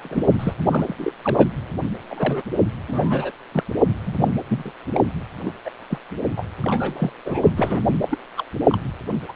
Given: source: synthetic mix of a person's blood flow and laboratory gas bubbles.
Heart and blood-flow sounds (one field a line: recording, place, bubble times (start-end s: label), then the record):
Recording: Doppler ultrasound of blood flow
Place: precordium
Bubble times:
0.00-0.23 s: bubbles
0.38-0.55 s: bubbles
0.68-1.12 s: bubbles
1.23-1.49 s: bubbles
2.10-2.42 s: bubbles
2.88-3.31 s: bubbles
3.51-3.64 s: bubbles
4.06-4.30 s: bubbles
4.47-4.71 s: bubbles
4.95-5.00 s: bubbles
5.44-5.55 s: bubbles
5.65-5.70 s: bubbles
5.89-5.98 s: bubbles
6.36-6.43 s: bubbles
6.63-7.12 s: bubbles
7.25-7.50 s: bubbles
7.56-7.81 s: bubbles
8.02-8.18 s: bubbles
8.37-8.45 s: bubbles
8.70-8.78 s: bubbles
9.28-9.33 s: bubbles
From the record:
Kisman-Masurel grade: 242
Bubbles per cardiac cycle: several, 3 to 8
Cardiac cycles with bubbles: 100%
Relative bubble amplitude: moderate (0.250 to 0.450)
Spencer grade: 3 (all of the cardiac periods contain showers or single bubble signals, but not dominating or overriding the cardiac motion signals)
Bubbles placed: anywhere in the cardiac cycle